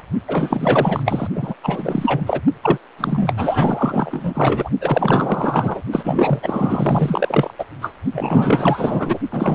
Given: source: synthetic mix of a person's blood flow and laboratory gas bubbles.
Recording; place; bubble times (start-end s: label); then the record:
Doppler ultrasound of blood flow; precordium
0.00-0.02 s: bubbles
0.28-1.27 s: bubbles
1.35-1.54 s: bubbles
1.63-2.40 s: bubbles
2.62-2.78 s: bubbles
2.98-3.34 s: bubbles
3.36-4.70 s: bubbles
4.81-5.82 s: bubbles
5.92-7.54 s: bubbles
7.58-7.65 s: bubbles
7.82-7.93 s: bubbles
8.12-9.19 s: bubbles
9.30-9.55 s: bubbles
From the record:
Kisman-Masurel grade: 444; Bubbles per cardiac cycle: continuous sound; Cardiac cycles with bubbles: 100%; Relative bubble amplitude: maximal (0.775 to 0.999); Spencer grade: 4 (maximum detectable bubble signal sounding continuously throughout systole and diastole of every cardiac period, and overriding the amplitude of the normal cardiac signals); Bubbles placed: only in the low amplitude regions of the cardiac cycle